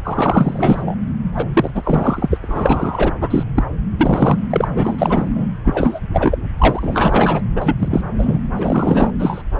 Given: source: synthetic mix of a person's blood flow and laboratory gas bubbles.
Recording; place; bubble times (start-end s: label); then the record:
Doppler ultrasound of blood flow; subclavian vein
0.05-0.95 s: bubbles
1.36-1.46 s: bubbles
1.53-1.70 s: bubbles
1.74-2.38 s: bubbles
2.42-3.12 s: bubbles
3.21-3.44 s: bubbles
3.55-3.64 s: bubbles
3.98-4.40 s: bubbles
4.50-5.29 s: bubbles
5.35-5.48 s: bubbles
5.64-6.00 s: bubbles
6.13-6.38 s: bubbles
6.58-7.42 s: bubbles
7.55-7.76 s: bubbles
7.79-8.02 s: bubbles
8.19-8.38 s: bubbles
8.56-9.10 s: bubbles
9.19-9.43 s: bubbles
From the record:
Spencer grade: 3 (all of the cardiac periods contain showers or single bubble signals, but not dominating or overriding the cardiac motion signals); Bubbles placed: anywhere in the cardiac cycle